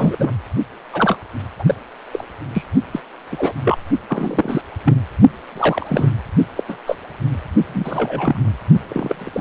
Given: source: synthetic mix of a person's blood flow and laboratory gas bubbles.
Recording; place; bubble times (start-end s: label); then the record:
Doppler ultrasound of blood flow; precordium
0.00-0.33 s: bubbles
0.93-1.17 s: bubbles
1.59-1.74 s: bubbles
2.12-2.24 s: bubbles
2.53-2.63 s: bubbles
2.92-3.00 s: bubbles
3.31-3.52 s: bubbles
3.65-3.78 s: bubbles
4.08-4.62 s: bubbles
4.84-4.94 s: bubbles
5.55-6.09 s: bubbles
6.56-6.64 s: bubbles
6.69-6.78 s: bubbles
6.86-6.96 s: bubbles
7.67-8.48 s: bubbles
8.89-9.41 s: bubbles
From the record:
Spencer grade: 3 (all of the cardiac periods contain showers or single bubble signals, but not dominating or overriding the cardiac motion signals); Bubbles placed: only in the low amplitude regions of the cardiac cycle